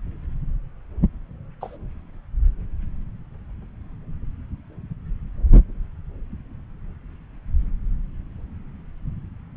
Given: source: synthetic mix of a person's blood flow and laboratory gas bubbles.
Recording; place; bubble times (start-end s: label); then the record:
Doppler ultrasound of blood flow; subclavian vein
1.60-1.76 s: bubbles
From the record:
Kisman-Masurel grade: 111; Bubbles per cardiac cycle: 1 to 2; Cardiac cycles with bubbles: 1 to 10%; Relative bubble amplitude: barely perceptible (0.100 to 0.250); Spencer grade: 1 (occasional bubble signal discernible with the cardiac motion signal, with majority of cardiac periods free of bubbles); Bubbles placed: anywhere in the cardiac cycle